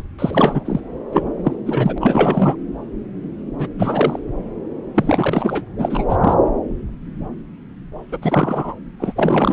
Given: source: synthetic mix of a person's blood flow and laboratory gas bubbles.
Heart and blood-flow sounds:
Doppler ultrasound of blood flow; subclavian vein
0.18-0.80 s: bubbles
1.12-1.30 s: bubbles
1.44-1.55 s: bubbles
1.66-1.98 s: bubbles
2.00-2.55 s: bubbles
3.58-3.68 s: bubbles
3.77-4.19 s: bubbles
4.96-5.63 s: bubbles
5.78-6.35 s: bubbles
8.11-8.18 s: bubbles
8.21-8.73 s: bubbles
9.00-9.13 s: bubbles
9.16-9.53 s: bubbles
From the record:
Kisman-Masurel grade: 333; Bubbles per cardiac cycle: rolling drumbeat, 9 or more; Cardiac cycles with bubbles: 50 to 99%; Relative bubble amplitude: loud (0.450 to 0.775); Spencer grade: 3 (all of the cardiac periods contain showers or single bubble signals, but not dominating or overriding the cardiac motion signals); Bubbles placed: anywhere in the cardiac cycle

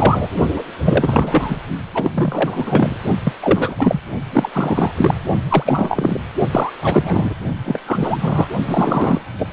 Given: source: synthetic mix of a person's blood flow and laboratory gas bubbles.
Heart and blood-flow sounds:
Doppler ultrasound of blood flow; precordium
0.00-0.28 s: bubbles
0.52-0.62 s: bubbles
0.84-1.57 s: bubbles
1.94-2.96 s: bubbles
3.24-3.33 s: bubbles
3.42-3.75 s: bubbles
3.78-4.00 s: bubbles
4.33-4.50 s: bubbles
4.52-4.92 s: bubbles
4.96-5.15 s: bubbles
5.49-6.21 s: bubbles
6.53-6.71 s: bubbles
6.82-7.34 s: bubbles
7.65-7.80 s: bubbles
7.86-8.47 s: bubbles
8.66-9.19 s: bubbles
9.38-9.48 s: bubbles
From the record:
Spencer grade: 3 (all of the cardiac periods contain showers or single bubble signals, but not dominating or overriding the cardiac motion signals); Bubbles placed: only in the low amplitude regions of the cardiac cycle

